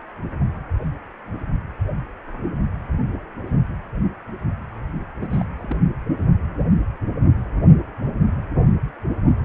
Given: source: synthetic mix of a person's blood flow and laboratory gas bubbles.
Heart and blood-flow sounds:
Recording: Doppler ultrasound of blood flow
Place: precordium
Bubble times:
5.21-5.45 s: bubbles
5.58-5.77 s: bubbles
From the record:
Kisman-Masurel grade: 211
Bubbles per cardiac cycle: several, 3 to 8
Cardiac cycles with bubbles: 1 to 10%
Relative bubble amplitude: barely perceptible (0.100 to 0.250)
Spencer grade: 1 (occasional bubble signal discernible with the cardiac motion signal, with majority of cardiac periods free of bubbles)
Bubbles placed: only in the low amplitude regions of the cardiac cycle

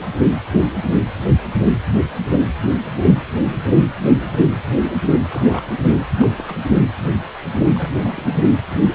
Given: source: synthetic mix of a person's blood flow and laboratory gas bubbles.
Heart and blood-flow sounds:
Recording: Doppler ultrasound of blood flow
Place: precordium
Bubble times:
5.21-5.63 s: bubbles
6.16-6.54 s: bubbles
6.63-6.71 s: bubbles
7.74-8.27 s: bubbles
From the record:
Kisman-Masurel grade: 221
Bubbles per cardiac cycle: several, 3 to 8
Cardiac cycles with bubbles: 10 to 50%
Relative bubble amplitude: barely perceptible (0.100 to 0.250)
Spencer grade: 2 (many but less than half of the cardiac periods contain bubble signals, singularly or in groups)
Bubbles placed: anywhere in the cardiac cycle

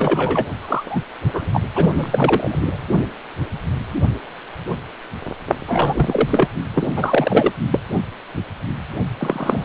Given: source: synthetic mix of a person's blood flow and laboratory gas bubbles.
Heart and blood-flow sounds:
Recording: Doppler ultrasound of blood flow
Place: precordium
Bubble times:
0.00-0.46 s: bubbles
0.58-1.01 s: bubbles
1.33-1.62 s: bubbles
1.75-2.76 s: bubbles
5.67-6.48 s: bubbles
6.74-6.87 s: bubbles
6.96-7.52 s: bubbles
7.71-7.79 s: bubbles
9.18-9.65 s: bubbles
From the record:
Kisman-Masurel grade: 333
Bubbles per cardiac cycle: rolling drumbeat, 9 or more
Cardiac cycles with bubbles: 50 to 99%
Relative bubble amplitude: loud (0.450 to 0.775)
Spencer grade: 3 (all of the cardiac periods contain showers or single bubble signals, but not dominating or overriding the cardiac motion signals)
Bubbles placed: only in the low amplitude regions of the cardiac cycle

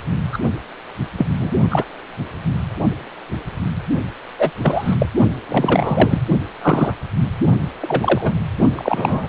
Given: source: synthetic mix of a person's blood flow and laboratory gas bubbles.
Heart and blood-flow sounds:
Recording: Doppler ultrasound of blood flow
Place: precordium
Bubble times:
0.00-0.03 s: bubbles
0.32-0.39 s: bubbles
1.18-1.26 s: bubbles
1.40-1.51 s: bubbles
1.70-1.84 s: bubbles
4.38-4.51 s: bubbles
4.62-4.96 s: bubbles
4.99-5.06 s: bubbles
5.49-6.21 s: bubbles
6.62-6.93 s: bubbles
7.81-8.31 s: bubbles
8.77-9.28 s: bubbles
From the record:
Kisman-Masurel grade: 233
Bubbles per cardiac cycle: several, 3 to 8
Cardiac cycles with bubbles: 50 to 99%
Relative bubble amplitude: loud (0.450 to 0.775)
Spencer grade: 3 (all of the cardiac periods contain showers or single bubble signals, but not dominating or overriding the cardiac motion signals)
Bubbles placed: only in the low amplitude regions of the cardiac cycle

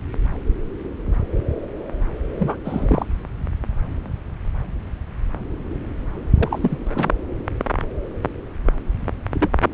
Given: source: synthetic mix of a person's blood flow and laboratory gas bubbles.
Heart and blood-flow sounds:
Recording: Doppler ultrasound of blood flow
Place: subclavian vein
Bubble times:
2.38-2.57 s: bubbles
2.65-3.06 s: bubbles
6.38-7.08 s: bubbles
9.34-9.48 s: bubbles
From the record:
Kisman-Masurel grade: 222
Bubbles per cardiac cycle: several, 3 to 8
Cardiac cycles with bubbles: 10 to 50%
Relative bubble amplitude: moderate (0.250 to 0.450)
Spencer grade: 2 (many but less than half of the cardiac periods contain bubble signals, singularly or in groups)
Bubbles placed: anywhere in the cardiac cycle

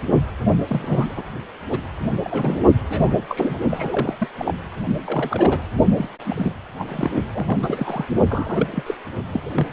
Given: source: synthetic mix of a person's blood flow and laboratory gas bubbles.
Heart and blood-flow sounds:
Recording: Doppler ultrasound of blood flow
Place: precordium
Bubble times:
0.47-0.52 s: bubbles
0.67-1.23 s: bubbles
1.70-1.79 s: bubbles
2.24-2.60 s: bubbles
2.90-3.19 s: bubbles
3.29-3.59 s: bubbles
3.69-4.15 s: bubbles
4.19-4.28 s: bubbles
4.38-4.54 s: bubbles
5.06-5.61 s: bubbles
5.96-6.08 s: bubbles
6.24-6.54 s: bubbles
6.79-6.85 s: bubbles
6.88-7.10 s: bubbles
7.33-8.05 s: bubbles
8.29-8.67 s: bubbles
8.72-8.83 s: bubbles
8.86-8.95 s: bubbles
9.33-9.43 s: bubbles
9.46-9.51 s: bubbles
9.55-9.67 s: bubbles
From the record:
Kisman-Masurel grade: 242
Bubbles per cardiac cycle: several, 3 to 8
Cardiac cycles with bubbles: 100%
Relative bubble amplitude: moderate (0.250 to 0.450)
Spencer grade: 3 (all of the cardiac periods contain showers or single bubble signals, but not dominating or overriding the cardiac motion signals)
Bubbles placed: only in the low amplitude regions of the cardiac cycle

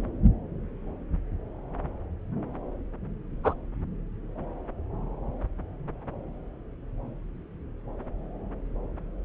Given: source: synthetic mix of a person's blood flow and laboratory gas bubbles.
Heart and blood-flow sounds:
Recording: Doppler ultrasound of blood flow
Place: subclavian vein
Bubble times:
3.43-3.54 s: bubbles
From the record:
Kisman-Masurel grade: 113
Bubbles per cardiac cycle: 1 to 2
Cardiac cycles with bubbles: 1 to 10%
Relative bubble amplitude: loud (0.450 to 0.775)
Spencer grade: 1 (occasional bubble signal discernible with the cardiac motion signal, with majority of cardiac periods free of bubbles)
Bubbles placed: anywhere in the cardiac cycle

